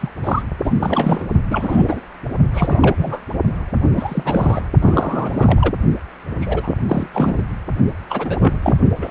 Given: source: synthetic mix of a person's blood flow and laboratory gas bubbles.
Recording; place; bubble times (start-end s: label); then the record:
Doppler ultrasound of blood flow; precordium
0.01-0.10 s: bubbles
0.23-0.42 s: bubbles
0.64-0.72 s: bubbles
0.80-1.26 s: bubbles
1.51-2.00 s: bubbles
2.53-3.24 s: bubbles
3.96-4.66 s: bubbles
4.80-5.72 s: bubbles
6.41-6.76 s: bubbles
6.88-7.08 s: bubbles
7.13-7.43 s: bubbles
8.10-8.59 s: bubbles
8.62-8.77 s: bubbles
8.98-9.11 s: bubbles
From the record:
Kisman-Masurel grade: 342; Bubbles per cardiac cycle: rolling drumbeat, 9 or more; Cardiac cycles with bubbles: 100%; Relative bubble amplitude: moderate (0.250 to 0.450); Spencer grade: 3 (all of the cardiac periods contain showers or single bubble signals, but not dominating or overriding the cardiac motion signals); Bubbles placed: only in the low amplitude regions of the cardiac cycle